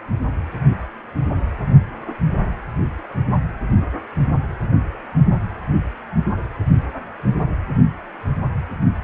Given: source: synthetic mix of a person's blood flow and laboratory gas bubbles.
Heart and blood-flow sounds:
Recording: Doppler ultrasound of blood flow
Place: precordium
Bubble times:
no bubbles
From the record:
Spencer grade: 0 (complete lack of bubble signals)

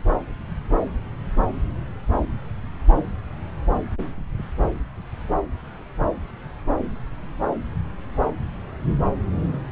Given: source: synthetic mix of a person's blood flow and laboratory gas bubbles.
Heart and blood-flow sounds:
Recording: Doppler ultrasound of blood flow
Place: subclavian vein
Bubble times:
no bubbles
From the record:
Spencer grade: 0 (complete lack of bubble signals)

